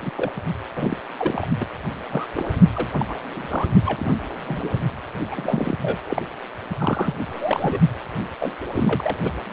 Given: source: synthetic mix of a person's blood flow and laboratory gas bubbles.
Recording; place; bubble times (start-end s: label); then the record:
Doppler ultrasound of blood flow; precordium
0.01-0.10 s: bubbles
0.17-0.31 s: bubbles
0.76-0.97 s: bubbles
1.17-1.47 s: bubbles
1.60-1.66 s: bubbles
2.12-2.27 s: bubbles
2.35-2.51 s: bubbles
2.73-2.89 s: bubbles
2.94-3.06 s: bubbles
3.08-3.16 s: bubbles
3.33-3.67 s: bubbles
3.85-4.13 s: bubbles
4.44-4.79 s: bubbles
5.30-5.77 s: bubbles
5.81-5.98 s: bubbles
6.07-6.22 s: bubbles
6.78-7.14 s: bubbles
7.29-7.80 s: bubbles
8.40-8.53 s: bubbles
8.74-9.17 s: bubbles
9.23-9.32 s: bubbles
From the record:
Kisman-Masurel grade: 232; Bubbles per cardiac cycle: several, 3 to 8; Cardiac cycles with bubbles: 50 to 99%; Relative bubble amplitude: moderate (0.250 to 0.450); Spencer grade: 3 (all of the cardiac periods contain showers or single bubble signals, but not dominating or overriding the cardiac motion signals); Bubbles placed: only in the low amplitude regions of the cardiac cycle